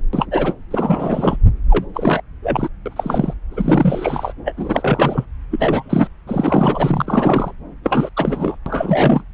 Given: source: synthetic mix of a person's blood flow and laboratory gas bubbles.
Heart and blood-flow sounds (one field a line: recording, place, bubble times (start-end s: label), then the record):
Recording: Doppler ultrasound of blood flow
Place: subclavian vein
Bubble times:
0.13-0.26 s: bubbles
0.31-0.54 s: bubbles
0.70-1.37 s: bubbles
1.69-1.85 s: bubbles
1.94-2.22 s: bubbles
2.42-2.68 s: bubbles
2.85-3.33 s: bubbles
3.51-4.33 s: bubbles
4.45-4.54 s: bubbles
4.57-5.25 s: bubbles
5.50-6.08 s: bubbles
6.27-7.53 s: bubbles
7.83-8.09 s: bubbles
8.16-8.56 s: bubbles
8.66-9.21 s: bubbles
From the record:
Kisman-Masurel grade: 343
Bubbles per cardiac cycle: rolling drumbeat, 9 or more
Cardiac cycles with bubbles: 100%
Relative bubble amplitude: loud (0.450 to 0.775)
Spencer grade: 3 (all of the cardiac periods contain showers or single bubble signals, but not dominating or overriding the cardiac motion signals)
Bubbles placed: anywhere in the cardiac cycle